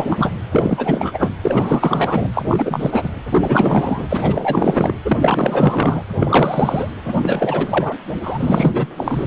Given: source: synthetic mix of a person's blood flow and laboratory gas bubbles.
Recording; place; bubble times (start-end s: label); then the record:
Doppler ultrasound of blood flow; precordium
0.00-0.32 s: bubbles
0.52-1.34 s: bubbles
1.42-2.27 s: bubbles
2.33-3.09 s: bubbles
3.30-4.06 s: bubbles
4.10-4.94 s: bubbles
5.04-5.18 s: bubbles
5.21-6.03 s: bubbles
6.20-6.90 s: bubbles
7.05-7.96 s: bubbles
8.22-8.87 s: bubbles
8.97-9.27 s: bubbles
From the record:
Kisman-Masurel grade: 444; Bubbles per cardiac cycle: continuous sound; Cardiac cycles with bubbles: 100%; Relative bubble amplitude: maximal (0.775 to 0.999); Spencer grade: 4 (maximum detectable bubble signal sounding continuously throughout systole and diastole of every cardiac period, and overriding the amplitude of the normal cardiac signals); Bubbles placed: anywhere in the cardiac cycle